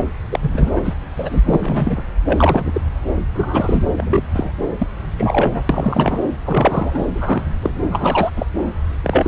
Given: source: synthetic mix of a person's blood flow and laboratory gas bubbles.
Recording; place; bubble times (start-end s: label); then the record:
Doppler ultrasound of blood flow; subclavian vein
0.00-0.04 s: bubbles
0.31-0.69 s: bubbles
0.75-0.96 s: bubbles
1.15-1.42 s: bubbles
1.45-2.02 s: bubbles
2.25-2.81 s: bubbles
3.33-3.84 s: bubbles
3.97-4.23 s: bubbles
4.34-4.52 s: bubbles
4.78-4.86 s: bubbles
5.16-5.64 s: bubbles
5.69-6.19 s: bubbles
6.46-7.06 s: bubbles
7.14-7.43 s: bubbles
7.62-7.71 s: bubbles
7.91-8.30 s: bubbles
8.36-8.46 s: bubbles
9.04-9.28 s: bubbles
From the record:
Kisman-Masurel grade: 243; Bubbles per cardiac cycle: several, 3 to 8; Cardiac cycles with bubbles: 100%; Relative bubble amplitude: loud (0.450 to 0.775); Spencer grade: 3 (all of the cardiac periods contain showers or single bubble signals, but not dominating or overriding the cardiac motion signals); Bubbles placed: anywhere in the cardiac cycle